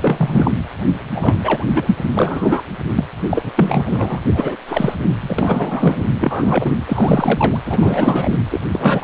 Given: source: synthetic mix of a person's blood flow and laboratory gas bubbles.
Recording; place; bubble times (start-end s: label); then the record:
Doppler ultrasound of blood flow; precordium
0.00-0.51 s: bubbles
0.93-1.37 s: bubbles
1.43-1.65 s: bubbles
1.74-1.95 s: bubbles
2.17-2.62 s: bubbles
2.95-3.04 s: bubbles
3.29-3.52 s: bubbles
3.56-4.19 s: bubbles
4.32-4.56 s: bubbles
4.67-4.96 s: bubbles
5.08-5.14 s: bubbles
5.21-6.04 s: bubbles
6.19-6.71 s: bubbles
6.85-7.58 s: bubbles
7.65-8.31 s: bubbles
8.50-8.61 s: bubbles
8.71-9.04 s: bubbles
From the record:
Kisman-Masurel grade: 343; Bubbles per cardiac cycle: rolling drumbeat, 9 or more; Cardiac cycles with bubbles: 100%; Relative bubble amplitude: loud (0.450 to 0.775); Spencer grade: 3 (all of the cardiac periods contain showers or single bubble signals, but not dominating or overriding the cardiac motion signals); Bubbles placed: anywhere in the cardiac cycle